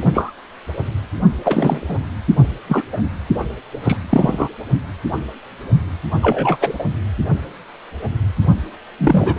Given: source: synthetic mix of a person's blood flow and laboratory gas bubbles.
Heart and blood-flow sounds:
Doppler ultrasound of blood flow; precordium
0.00-0.33 s: bubbles
1.44-1.84 s: bubbles
1.88-1.97 s: bubbles
2.67-2.83 s: bubbles
2.92-2.97 s: bubbles
3.83-3.97 s: bubbles
4.09-4.48 s: bubbles
6.21-6.56 s: bubbles
6.60-6.84 s: bubbles
8.99-9.38 s: bubbles
From the record:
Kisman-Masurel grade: 233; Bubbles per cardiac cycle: several, 3 to 8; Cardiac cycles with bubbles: 50 to 99%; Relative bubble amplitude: loud (0.450 to 0.775); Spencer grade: 3 (all of the cardiac periods contain showers or single bubble signals, but not dominating or overriding the cardiac motion signals); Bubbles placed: anywhere in the cardiac cycle

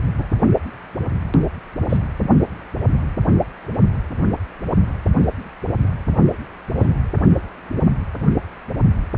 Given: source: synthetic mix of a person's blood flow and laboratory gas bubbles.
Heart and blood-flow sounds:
Doppler ultrasound of blood flow; precordium
0.18-0.23 s: bubbles
1.89-1.97 s: bubbles
6.80-6.88 s: bubbles
From the record:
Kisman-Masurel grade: 122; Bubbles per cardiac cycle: 1 to 2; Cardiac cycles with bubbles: 10 to 50%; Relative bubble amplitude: moderate (0.250 to 0.450); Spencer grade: 2 (many but less than half of the cardiac periods contain bubble signals, singularly or in groups); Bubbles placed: only in the low amplitude regions of the cardiac cycle

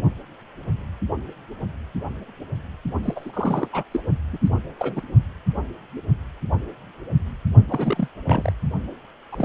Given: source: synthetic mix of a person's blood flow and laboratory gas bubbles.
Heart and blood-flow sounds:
Doppler ultrasound of blood flow; precordium
3.02-3.69 s: bubbles
3.73-3.84 s: bubbles
3.91-4.00 s: bubbles
4.32-4.38 s: bubbles
4.44-4.49 s: bubbles
4.77-4.93 s: bubbles
4.95-5.01 s: bubbles
7.68-8.08 s: bubbles
8.27-8.53 s: bubbles
9.32-9.45 s: bubbles
From the record:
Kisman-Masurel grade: 221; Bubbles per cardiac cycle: several, 3 to 8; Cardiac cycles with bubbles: 10 to 50%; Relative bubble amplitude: barely perceptible (0.100 to 0.250); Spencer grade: 2 (many but less than half of the cardiac periods contain bubble signals, singularly or in groups); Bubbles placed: only in the low amplitude regions of the cardiac cycle

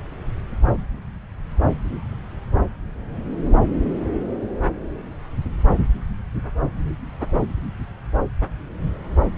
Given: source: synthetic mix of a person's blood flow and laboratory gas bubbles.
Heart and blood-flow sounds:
Doppler ultrasound of blood flow; subclavian vein
0.77-0.82 s: bubbles
From the record:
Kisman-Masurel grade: 121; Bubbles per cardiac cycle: 1 to 2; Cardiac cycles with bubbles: 10 to 50%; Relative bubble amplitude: barely perceptible (0.100 to 0.250); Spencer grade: 2 (many but less than half of the cardiac periods contain bubble signals, singularly or in groups); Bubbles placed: anywhere in the cardiac cycle

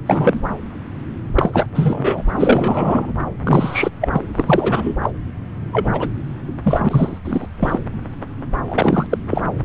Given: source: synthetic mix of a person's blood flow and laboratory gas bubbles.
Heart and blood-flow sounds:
Doppler ultrasound of blood flow; subclavian vein
0.06-0.41 s: bubbles
1.35-1.67 s: bubbles
1.74-2.23 s: bubbles
2.35-3.14 s: bubbles
3.44-3.91 s: bubbles
4.01-4.08 s: bubbles
4.13-4.22 s: bubbles
4.36-4.99 s: bubbles
5.03-5.11 s: bubbles
5.71-6.08 s: bubbles
6.64-7.20 s: bubbles
7.24-7.47 s: bubbles
7.60-7.79 s: bubbles
8.68-9.06 s: bubbles
9.11-9.18 s: bubbles
9.30-9.42 s: bubbles
From the record:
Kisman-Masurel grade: 333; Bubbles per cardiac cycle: rolling drumbeat, 9 or more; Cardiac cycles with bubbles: 50 to 99%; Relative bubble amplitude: loud (0.450 to 0.775); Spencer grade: 3 (all of the cardiac periods contain showers or single bubble signals, but not dominating or overriding the cardiac motion signals); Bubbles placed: anywhere in the cardiac cycle

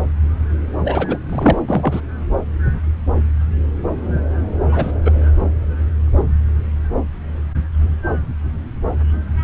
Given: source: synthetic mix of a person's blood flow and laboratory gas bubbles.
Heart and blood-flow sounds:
Doppler ultrasound of blood flow; subclavian vein
0.84-1.18 s: bubbles
1.29-1.62 s: bubbles
1.67-2.01 s: bubbles
4.71-4.92 s: bubbles
5.04-5.12 s: bubbles
From the record:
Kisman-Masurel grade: 223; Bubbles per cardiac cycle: several, 3 to 8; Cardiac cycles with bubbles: 10 to 50%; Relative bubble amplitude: loud (0.450 to 0.775); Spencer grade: 2 (many but less than half of the cardiac periods contain bubble signals, singularly or in groups); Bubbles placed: anywhere in the cardiac cycle

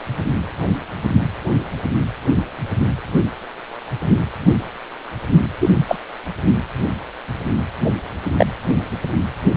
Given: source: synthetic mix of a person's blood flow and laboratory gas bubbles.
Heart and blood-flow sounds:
Doppler ultrasound of blood flow; precordium
5.60-5.69 s: bubbles
5.88-5.96 s: bubbles
8.38-8.46 s: bubbles
From the record:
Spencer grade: 2 (many but less than half of the cardiac periods contain bubble signals, singularly or in groups); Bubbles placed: anywhere in the cardiac cycle

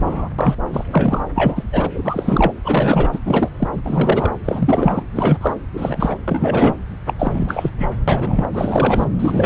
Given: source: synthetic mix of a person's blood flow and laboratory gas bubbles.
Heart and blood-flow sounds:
Doppler ultrasound of blood flow; subclavian vein
0.00-0.29 s: bubbles
0.39-0.55 s: bubbles
0.70-1.24 s: bubbles
1.34-1.64 s: bubbles
1.72-1.90 s: bubbles
1.94-2.52 s: bubbles
2.64-3.20 s: bubbles
3.25-3.49 s: bubbles
3.58-3.70 s: bubbles
3.72-3.81 s: bubbles
3.83-4.32 s: bubbles
4.44-5.03 s: bubbles
5.14-5.38 s: bubbles
5.41-5.54 s: bubbles
5.74-6.17 s: bubbles
6.28-6.75 s: bubbles
7.06-7.13 s: bubbles
7.19-7.70 s: bubbles
7.78-7.91 s: bubbles
8.07-8.48 s: bubbles
8.53-9.06 s: bubbles
9.19-9.46 s: bubbles
From the record:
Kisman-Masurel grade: 343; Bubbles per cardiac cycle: rolling drumbeat, 9 or more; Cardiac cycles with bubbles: 100%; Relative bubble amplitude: loud (0.450 to 0.775); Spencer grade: 3 (all of the cardiac periods contain showers or single bubble signals, but not dominating or overriding the cardiac motion signals); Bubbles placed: anywhere in the cardiac cycle

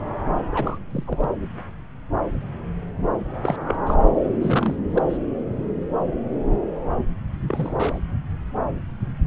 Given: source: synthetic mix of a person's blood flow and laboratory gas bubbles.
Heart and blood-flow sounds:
Doppler ultrasound of blood flow; subclavian vein
0.51-0.78 s: bubbles
0.90-1.04 s: bubbles
1.07-1.30 s: bubbles
3.42-3.56 s: bubbles
3.66-3.75 s: bubbles
3.87-3.94 s: bubbles
4.41-4.76 s: bubbles
4.89-5.02 s: bubbles
5.09-5.18 s: bubbles
7.48-7.99 s: bubbles
9.25-9.27 s: bubbles
From the record:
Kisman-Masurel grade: 221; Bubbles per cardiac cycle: several, 3 to 8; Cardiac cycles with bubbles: 10 to 50%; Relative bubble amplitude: barely perceptible (0.100 to 0.250); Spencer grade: 2 (many but less than half of the cardiac periods contain bubble signals, singularly or in groups); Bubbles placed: anywhere in the cardiac cycle

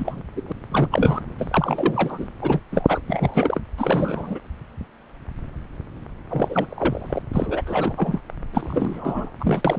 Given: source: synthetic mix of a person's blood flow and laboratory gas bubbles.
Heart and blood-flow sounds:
Doppler ultrasound of blood flow; subclavian vein
0.00-0.22 s: bubbles
0.36-0.52 s: bubbles
0.72-1.20 s: bubbles
1.38-2.29 s: bubbles
2.42-2.59 s: bubbles
2.71-3.01 s: bubbles
3.07-3.60 s: bubbles
3.77-4.39 s: bubbles
6.29-7.22 s: bubbles
7.33-7.62 s: bubbles
7.66-8.21 s: bubbles
8.53-9.30 s: bubbles
9.39-9.79 s: bubbles
From the record:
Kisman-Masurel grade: 333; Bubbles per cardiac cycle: rolling drumbeat, 9 or more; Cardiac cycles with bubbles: 50 to 99%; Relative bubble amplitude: loud (0.450 to 0.775); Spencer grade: 3 (all of the cardiac periods contain showers or single bubble signals, but not dominating or overriding the cardiac motion signals); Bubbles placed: anywhere in the cardiac cycle

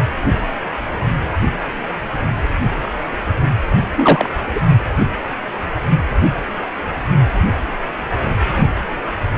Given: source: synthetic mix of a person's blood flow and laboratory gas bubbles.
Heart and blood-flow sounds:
Doppler ultrasound of blood flow; precordium
3.96-4.29 s: bubbles
4.54-4.61 s: bubbles
From the record:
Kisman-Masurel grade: 223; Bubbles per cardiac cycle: several, 3 to 8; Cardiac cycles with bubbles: 10 to 50%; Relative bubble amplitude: loud (0.450 to 0.775); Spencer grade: 2 (many but less than half of the cardiac periods contain bubble signals, singularly or in groups); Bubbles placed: anywhere in the cardiac cycle

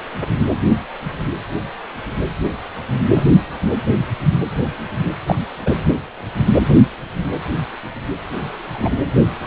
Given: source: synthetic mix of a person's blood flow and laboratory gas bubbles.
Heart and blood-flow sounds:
Doppler ultrasound of blood flow; precordium
3.13-3.23 s: bubbles
5.26-5.36 s: bubbles
5.66-5.71 s: bubbles
8.74-8.96 s: bubbles
From the record:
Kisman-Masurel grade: 123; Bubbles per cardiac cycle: 1 to 2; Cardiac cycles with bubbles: 10 to 50%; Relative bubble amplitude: loud (0.450 to 0.775); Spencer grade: 2 (many but less than half of the cardiac periods contain bubble signals, singularly or in groups); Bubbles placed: anywhere in the cardiac cycle

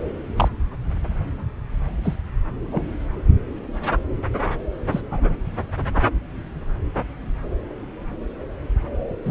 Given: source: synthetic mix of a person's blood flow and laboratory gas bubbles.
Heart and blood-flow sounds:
Doppler ultrasound of blood flow; subclavian vein
0.36-0.48 s: bubbles
2.03-2.17 s: bubbles
2.71-2.82 s: bubbles
4.91-5.01 s: bubbles
5.11-5.34 s: bubbles
9.25-9.31 s: bubbles
From the record:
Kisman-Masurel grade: 122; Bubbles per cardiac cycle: 1 to 2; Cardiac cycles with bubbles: 10 to 50%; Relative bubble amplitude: moderate (0.250 to 0.450); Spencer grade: 2 (many but less than half of the cardiac periods contain bubble signals, singularly or in groups); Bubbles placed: anywhere in the cardiac cycle

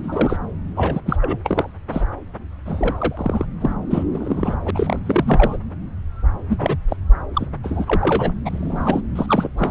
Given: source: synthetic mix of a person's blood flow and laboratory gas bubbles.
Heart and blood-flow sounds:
Doppler ultrasound of blood flow; subclavian vein
0.03-0.37 s: bubbles
0.76-1.00 s: bubbles
1.06-1.16 s: bubbles
1.21-1.38 s: bubbles
1.44-1.72 s: bubbles
1.91-2.02 s: bubbles
2.66-3.46 s: bubbles
3.60-3.74 s: bubbles
3.90-4.05 s: bubbles
4.11-4.56 s: bubbles
4.65-4.71 s: bubbles
4.74-4.99 s: bubbles
5.05-5.57 s: bubbles
6.50-6.76 s: bubbles
6.88-6.96 s: bubbles
7.35-7.46 s: bubbles
7.63-8.30 s: bubbles
8.45-9.01 s: bubbles
9.15-9.49 s: bubbles
9.57-9.71 s: bubbles
From the record:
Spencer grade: 3 (all of the cardiac periods contain showers or single bubble signals, but not dominating or overriding the cardiac motion signals); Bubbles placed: anywhere in the cardiac cycle

